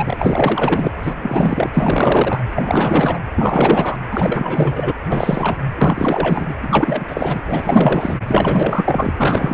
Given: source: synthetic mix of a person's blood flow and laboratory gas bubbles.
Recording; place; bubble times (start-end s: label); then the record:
Doppler ultrasound of blood flow; precordium
0.00-0.93 s: bubbles
1.02-1.13 s: bubbles
1.17-1.71 s: bubbles
1.73-2.44 s: bubbles
2.56-3.20 s: bubbles
3.33-3.98 s: bubbles
4.10-4.92 s: bubbles
5.06-5.57 s: bubbles
5.75-6.54 s: bubbles
6.62-7.39 s: bubbles
7.44-8.18 s: bubbles
8.27-9.13 s: bubbles
9.18-9.54 s: bubbles
From the record:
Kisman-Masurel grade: 444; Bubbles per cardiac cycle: continuous sound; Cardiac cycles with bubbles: 100%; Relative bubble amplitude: maximal (0.775 to 0.999); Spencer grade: 4 (maximum detectable bubble signal sounding continuously throughout systole and diastole of every cardiac period, and overriding the amplitude of the normal cardiac signals); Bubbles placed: anywhere in the cardiac cycle